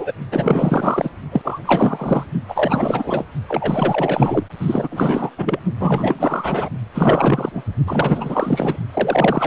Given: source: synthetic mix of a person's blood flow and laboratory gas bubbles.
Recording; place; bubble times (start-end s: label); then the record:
Doppler ultrasound of blood flow; precordium
0.00-0.12 s: bubbles
0.32-1.10 s: bubbles
1.31-1.59 s: bubbles
1.65-2.25 s: bubbles
2.48-3.25 s: bubbles
3.48-4.45 s: bubbles
4.60-5.31 s: bubbles
5.38-5.59 s: bubbles
5.80-6.69 s: bubbles
6.94-7.63 s: bubbles
7.87-8.77 s: bubbles
8.93-9.47 s: bubbles
From the record:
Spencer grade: 4 (maximum detectable bubble signal sounding continuously throughout systole and diastole of every cardiac period, and overriding the amplitude of the normal cardiac signals); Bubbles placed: only in the low amplitude regions of the cardiac cycle